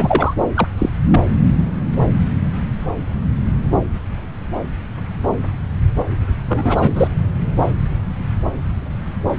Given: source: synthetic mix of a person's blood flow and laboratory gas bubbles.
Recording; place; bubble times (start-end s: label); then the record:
Doppler ultrasound of blood flow; subclavian vein
0.00-0.34 s: bubbles
0.55-0.68 s: bubbles
0.78-0.89 s: bubbles
1.11-1.19 s: bubbles
6.48-7.07 s: bubbles
From the record:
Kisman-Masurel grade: 223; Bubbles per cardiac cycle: several, 3 to 8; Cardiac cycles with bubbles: 10 to 50%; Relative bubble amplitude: loud (0.450 to 0.775); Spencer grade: 2 (many but less than half of the cardiac periods contain bubble signals, singularly or in groups); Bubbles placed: anywhere in the cardiac cycle